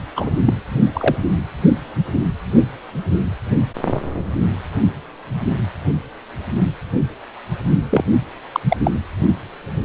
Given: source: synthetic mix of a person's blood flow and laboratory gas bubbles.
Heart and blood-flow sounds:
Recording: Doppler ultrasound of blood flow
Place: precordium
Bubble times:
0.16-0.30 s: bubbles
0.46-0.54 s: bubbles
0.93-1.18 s: bubbles
7.90-8.04 s: bubbles
8.54-8.60 s: bubbles
8.68-8.77 s: bubbles
8.83-8.91 s: bubbles
From the record:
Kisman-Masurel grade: 223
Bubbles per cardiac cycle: several, 3 to 8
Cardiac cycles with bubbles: 10 to 50%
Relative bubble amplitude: loud (0.450 to 0.775)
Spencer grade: 2 (many but less than half of the cardiac periods contain bubble signals, singularly or in groups)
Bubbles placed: only in the low amplitude regions of the cardiac cycle

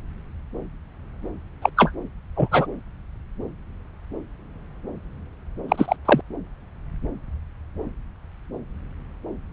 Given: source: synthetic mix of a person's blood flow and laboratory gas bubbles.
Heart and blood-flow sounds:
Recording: Doppler ultrasound of blood flow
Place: subclavian vein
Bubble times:
1.61-1.70 s: bubbles
1.76-1.91 s: bubbles
2.35-2.48 s: bubbles
2.52-2.67 s: bubbles
5.68-5.96 s: bubbles
6.05-6.21 s: bubbles
From the record:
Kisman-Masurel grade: 223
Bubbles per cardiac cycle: several, 3 to 8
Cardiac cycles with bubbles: 10 to 50%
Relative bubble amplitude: loud (0.450 to 0.775)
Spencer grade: 2 (many but less than half of the cardiac periods contain bubble signals, singularly or in groups)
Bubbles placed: anywhere in the cardiac cycle

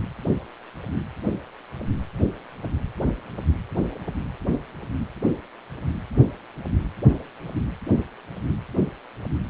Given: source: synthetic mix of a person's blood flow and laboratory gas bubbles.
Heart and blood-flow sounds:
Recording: Doppler ultrasound of blood flow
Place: precordium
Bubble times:
no bubbles
From the record:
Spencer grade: 0 (complete lack of bubble signals)

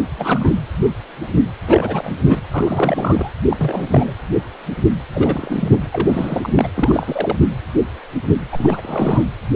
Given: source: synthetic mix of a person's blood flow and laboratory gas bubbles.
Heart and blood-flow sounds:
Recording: Doppler ultrasound of blood flow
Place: precordium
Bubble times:
0.00-0.05 s: bubbles
0.17-0.55 s: bubbles
1.67-2.20 s: bubbles
2.23-2.39 s: bubbles
2.51-3.33 s: bubbles
3.50-4.12 s: bubbles
5.14-5.90 s: bubbles
5.92-6.68 s: bubbles
6.76-7.37 s: bubbles
8.52-9.24 s: bubbles
From the record:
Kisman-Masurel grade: 332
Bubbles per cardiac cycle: rolling drumbeat, 9 or more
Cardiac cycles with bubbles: 50 to 99%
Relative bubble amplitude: moderate (0.250 to 0.450)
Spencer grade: 3 (all of the cardiac periods contain showers or single bubble signals, but not dominating or overriding the cardiac motion signals)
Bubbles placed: anywhere in the cardiac cycle

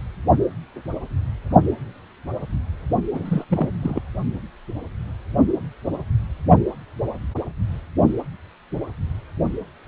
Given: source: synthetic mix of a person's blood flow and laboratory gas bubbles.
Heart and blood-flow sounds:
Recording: Doppler ultrasound of blood flow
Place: precordium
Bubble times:
3.14-3.45 s: bubbles
3.50-3.68 s: bubbles
3.82-4.01 s: bubbles
From the record:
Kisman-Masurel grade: 212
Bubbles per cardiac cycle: several, 3 to 8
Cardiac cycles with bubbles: 1 to 10%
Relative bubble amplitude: moderate (0.250 to 0.450)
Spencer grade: 1 (occasional bubble signal discernible with the cardiac motion signal, with majority of cardiac periods free of bubbles)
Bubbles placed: only in the low amplitude regions of the cardiac cycle

